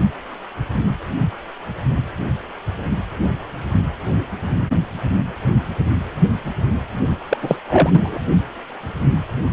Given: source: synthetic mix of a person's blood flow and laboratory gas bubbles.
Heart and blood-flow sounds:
Doppler ultrasound of blood flow; precordium
7.29-7.38 s: bubbles
7.41-7.57 s: bubbles
7.68-8.21 s: bubbles
From the record:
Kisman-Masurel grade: 213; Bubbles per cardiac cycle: several, 3 to 8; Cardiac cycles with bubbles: 1 to 10%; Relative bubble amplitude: loud (0.450 to 0.775); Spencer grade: 1 (occasional bubble signal discernible with the cardiac motion signal, with majority of cardiac periods free of bubbles); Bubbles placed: anywhere in the cardiac cycle

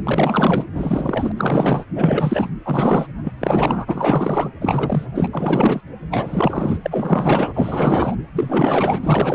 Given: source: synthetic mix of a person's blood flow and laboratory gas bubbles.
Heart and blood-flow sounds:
Doppler ultrasound of blood flow; precordium
0.00-0.02 s: bubbles
0.04-0.66 s: bubbles
0.74-1.32 s: bubbles
1.37-1.85 s: bubbles
1.95-2.50 s: bubbles
2.64-3.07 s: bubbles
3.24-3.33 s: bubbles
3.40-4.50 s: bubbles
4.61-5.07 s: bubbles
5.15-5.28 s: bubbles
5.33-5.81 s: bubbles
6.11-6.79 s: bubbles
6.83-8.16 s: bubbles
8.34-9.34 s: bubbles
From the record:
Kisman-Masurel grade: 444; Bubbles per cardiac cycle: continuous sound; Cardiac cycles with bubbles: 100%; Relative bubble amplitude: maximal (0.775 to 0.999); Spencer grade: 4 (maximum detectable bubble signal sounding continuously throughout systole and diastole of every cardiac period, and overriding the amplitude of the normal cardiac signals); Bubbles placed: anywhere in the cardiac cycle

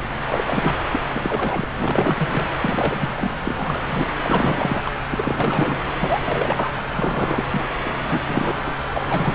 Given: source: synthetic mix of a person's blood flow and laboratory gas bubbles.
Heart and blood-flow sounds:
Doppler ultrasound of blood flow; subclavian vein
0.28-0.44 s: bubbles
0.47-0.85 s: bubbles
0.94-0.99 s: bubbles
1.14-1.67 s: bubbles
1.77-2.48 s: bubbles
2.60-3.30 s: bubbles
3.44-4.08 s: bubbles
4.24-4.82 s: bubbles
4.86-4.93 s: bubbles
5.10-5.78 s: bubbles
6.00-6.73 s: bubbles
6.95-7.45 s: bubbles
7.52-7.64 s: bubbles
7.84-7.93 s: bubbles
8.07-8.76 s: bubbles
8.94-9.35 s: bubbles
From the record:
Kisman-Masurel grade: 332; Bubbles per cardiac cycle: rolling drumbeat, 9 or more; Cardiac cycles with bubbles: 50 to 99%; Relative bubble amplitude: moderate (0.250 to 0.450); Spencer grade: 3 (all of the cardiac periods contain showers or single bubble signals, but not dominating or overriding the cardiac motion signals); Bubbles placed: anywhere in the cardiac cycle

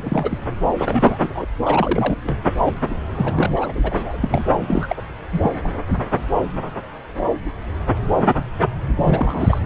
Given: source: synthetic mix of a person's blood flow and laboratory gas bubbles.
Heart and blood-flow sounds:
Doppler ultrasound of blood flow; subclavian vein
0.00-0.38 s: bubbles
0.78-1.18 s: bubbles
1.21-1.30 s: bubbles
1.34-1.46 s: bubbles
1.66-2.16 s: bubbles
2.24-2.40 s: bubbles
2.60-2.73 s: bubbles
2.90-2.94 s: bubbles
3.15-3.50 s: bubbles
3.56-4.46 s: bubbles
4.67-5.03 s: bubbles
5.32-5.51 s: bubbles
5.64-5.68 s: bubbles
8.96-9.59 s: bubbles
From the record:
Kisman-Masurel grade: 332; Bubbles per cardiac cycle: rolling drumbeat, 9 or more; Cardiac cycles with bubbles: 50 to 99%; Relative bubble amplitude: moderate (0.250 to 0.450); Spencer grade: 3 (all of the cardiac periods contain showers or single bubble signals, but not dominating or overriding the cardiac motion signals); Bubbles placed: anywhere in the cardiac cycle

